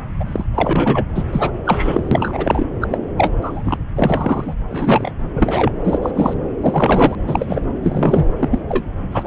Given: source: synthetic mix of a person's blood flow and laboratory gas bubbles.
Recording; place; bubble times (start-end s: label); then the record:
Doppler ultrasound of blood flow; subclavian vein
0.20-0.45 s: bubbles
0.54-1.05 s: bubbles
1.15-1.24 s: bubbles
1.32-1.51 s: bubbles
1.64-2.08 s: bubbles
2.11-2.66 s: bubbles
2.80-2.89 s: bubbles
2.92-2.97 s: bubbles
3.17-3.33 s: bubbles
3.42-3.78 s: bubbles
3.96-4.54 s: bubbles
4.68-5.12 s: bubbles
5.30-5.72 s: bubbles
5.83-5.99 s: bubbles
6.02-6.12 s: bubbles
6.15-6.33 s: bubbles
6.61-7.15 s: bubbles
7.19-7.62 s: bubbles
7.83-8.27 s: bubbles
8.39-8.60 s: bubbles
8.68-8.84 s: bubbles
9.12-9.27 s: bubbles
From the record:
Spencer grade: 3 (all of the cardiac periods contain showers or single bubble signals, but not dominating or overriding the cardiac motion signals); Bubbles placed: anywhere in the cardiac cycle